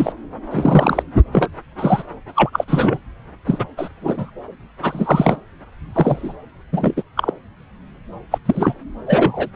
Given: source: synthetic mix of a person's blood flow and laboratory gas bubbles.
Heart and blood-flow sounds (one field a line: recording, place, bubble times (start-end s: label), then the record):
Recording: Doppler ultrasound of blood flow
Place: subclavian vein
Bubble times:
0.00-0.13 s: bubbles
0.51-1.03 s: bubbles
1.32-1.48 s: bubbles
1.78-2.02 s: bubbles
2.35-2.50 s: bubbles
2.52-2.64 s: bubbles
2.67-2.98 s: bubbles
3.46-3.66 s: bubbles
3.77-3.89 s: bubbles
4.02-4.30 s: bubbles
4.82-5.41 s: bubbles
5.94-6.33 s: bubbles
6.72-7.03 s: bubbles
7.17-7.31 s: bubbles
8.31-8.38 s: bubbles
8.46-8.74 s: bubbles
9.06-9.49 s: bubbles
From the record:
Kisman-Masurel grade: 233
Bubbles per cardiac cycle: several, 3 to 8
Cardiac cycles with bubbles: 50 to 99%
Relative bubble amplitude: loud (0.450 to 0.775)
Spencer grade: 3 (all of the cardiac periods contain showers or single bubble signals, but not dominating or overriding the cardiac motion signals)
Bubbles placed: anywhere in the cardiac cycle